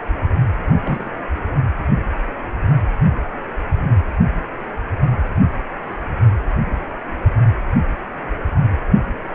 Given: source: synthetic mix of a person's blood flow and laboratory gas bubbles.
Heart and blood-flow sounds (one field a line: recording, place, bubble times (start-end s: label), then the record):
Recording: Doppler ultrasound of blood flow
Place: precordium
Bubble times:
0.82-1.11 s: bubbles
From the record:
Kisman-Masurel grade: 122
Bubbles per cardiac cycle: 1 to 2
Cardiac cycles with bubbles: 10 to 50%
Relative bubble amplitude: moderate (0.250 to 0.450)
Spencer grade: 2 (many but less than half of the cardiac periods contain bubble signals, singularly or in groups)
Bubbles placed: only in the low amplitude regions of the cardiac cycle